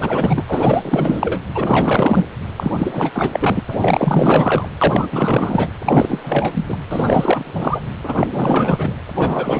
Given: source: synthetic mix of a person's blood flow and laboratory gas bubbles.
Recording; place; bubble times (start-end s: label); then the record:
Doppler ultrasound of blood flow; precordium
0.00-0.44 s: bubbles
0.48-1.42 s: bubbles
1.54-2.28 s: bubbles
2.57-2.71 s: bubbles
2.78-3.62 s: bubbles
3.69-4.69 s: bubbles
4.81-5.09 s: bubbles
5.12-5.68 s: bubbles
5.85-6.77 s: bubbles
6.88-7.81 s: bubbles
8.04-8.95 s: bubbles
9.15-9.60 s: bubbles
From the record:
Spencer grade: 4 (maximum detectable bubble signal sounding continuously throughout systole and diastole of every cardiac period, and overriding the amplitude of the normal cardiac signals); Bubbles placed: anywhere in the cardiac cycle